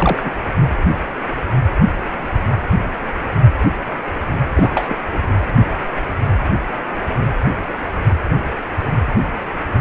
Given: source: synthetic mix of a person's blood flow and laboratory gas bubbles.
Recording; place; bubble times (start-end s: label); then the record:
Doppler ultrasound of blood flow; precordium
0.00-0.32 s: bubbles
4.54-4.96 s: bubbles
5.11-5.37 s: bubbles
From the record:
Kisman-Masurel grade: 222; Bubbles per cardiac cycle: several, 3 to 8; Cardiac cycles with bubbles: 10 to 50%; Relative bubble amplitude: moderate (0.250 to 0.450); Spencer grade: 2 (many but less than half of the cardiac periods contain bubble signals, singularly or in groups); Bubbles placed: anywhere in the cardiac cycle